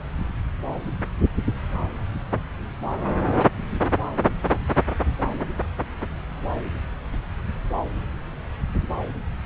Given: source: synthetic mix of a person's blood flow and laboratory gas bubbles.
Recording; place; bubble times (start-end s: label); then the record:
Doppler ultrasound of blood flow; subclavian vein
no bubbles
From the record:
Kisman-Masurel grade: 000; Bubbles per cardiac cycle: 0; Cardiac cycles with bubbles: 0%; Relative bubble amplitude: no bubbles discernible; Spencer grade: 0 (complete lack of bubble signals)